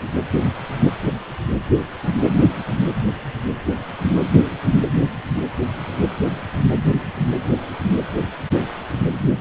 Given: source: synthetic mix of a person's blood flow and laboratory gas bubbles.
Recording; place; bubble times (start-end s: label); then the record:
Doppler ultrasound of blood flow; precordium
no bubbles
From the record:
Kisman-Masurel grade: 000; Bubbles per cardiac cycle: 0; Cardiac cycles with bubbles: 0%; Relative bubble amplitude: no bubbles discernible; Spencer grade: 0 (complete lack of bubble signals)